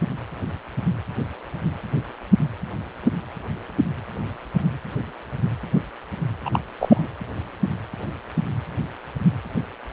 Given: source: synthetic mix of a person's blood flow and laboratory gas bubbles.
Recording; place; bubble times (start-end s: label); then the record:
Doppler ultrasound of blood flow; precordium
6.45-6.50 s: bubbles
6.53-6.61 s: bubbles
6.79-7.07 s: bubbles
From the record:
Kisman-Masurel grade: 213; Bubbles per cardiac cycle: several, 3 to 8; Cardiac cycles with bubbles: 1 to 10%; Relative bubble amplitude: loud (0.450 to 0.775); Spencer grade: 1 (occasional bubble signal discernible with the cardiac motion signal, with majority of cardiac periods free of bubbles); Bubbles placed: anywhere in the cardiac cycle